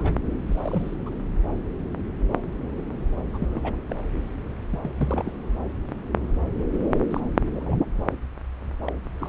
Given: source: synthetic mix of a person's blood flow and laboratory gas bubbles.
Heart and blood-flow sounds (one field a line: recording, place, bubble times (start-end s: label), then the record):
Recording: Doppler ultrasound of blood flow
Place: subclavian vein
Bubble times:
0.00-0.17 s: bubbles
0.48-0.94 s: bubbles
1.06-1.09 s: bubbles
3.32-3.75 s: bubbles
3.89-3.96 s: bubbles
4.12-4.21 s: bubbles
4.70-4.91 s: bubbles
4.96-5.33 s: bubbles
6.71-6.98 s: bubbles
7.10-7.21 s: bubbles
7.54-7.76 s: bubbles
8.85-8.95 s: bubbles
9.20-9.28 s: bubbles
From the record:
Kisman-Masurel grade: 232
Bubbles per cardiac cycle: several, 3 to 8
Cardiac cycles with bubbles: 50 to 99%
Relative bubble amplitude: moderate (0.250 to 0.450)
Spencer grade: 3 (all of the cardiac periods contain showers or single bubble signals, but not dominating or overriding the cardiac motion signals)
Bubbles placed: anywhere in the cardiac cycle